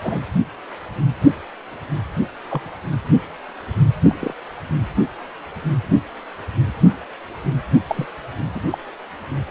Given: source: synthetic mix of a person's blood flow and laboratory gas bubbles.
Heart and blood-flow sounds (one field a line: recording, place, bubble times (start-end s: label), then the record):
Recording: Doppler ultrasound of blood flow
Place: precordium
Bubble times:
0.02-0.21 s: bubbles
2.49-2.69 s: bubbles
4.02-4.15 s: bubbles
4.21-4.34 s: bubbles
7.87-8.06 s: bubbles
8.54-8.61 s: bubbles
8.71-8.78 s: bubbles
From the record:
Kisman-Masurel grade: 122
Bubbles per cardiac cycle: 1 to 2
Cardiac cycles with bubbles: 10 to 50%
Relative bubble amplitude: moderate (0.250 to 0.450)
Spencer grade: 2 (many but less than half of the cardiac periods contain bubble signals, singularly or in groups)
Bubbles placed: anywhere in the cardiac cycle